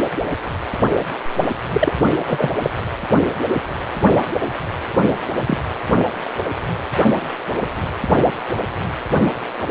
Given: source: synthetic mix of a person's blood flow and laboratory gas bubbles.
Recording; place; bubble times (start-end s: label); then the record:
Doppler ultrasound of blood flow; precordium
1.73-1.93 s: bubbles
2.25-2.50 s: bubbles
2.62-2.70 s: bubbles
5.47-5.58 s: bubbles
From the record:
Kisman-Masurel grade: 123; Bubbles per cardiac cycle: 1 to 2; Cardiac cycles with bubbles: 10 to 50%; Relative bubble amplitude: loud (0.450 to 0.775); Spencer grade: 2 (many but less than half of the cardiac periods contain bubble signals, singularly or in groups); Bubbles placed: only in the low amplitude regions of the cardiac cycle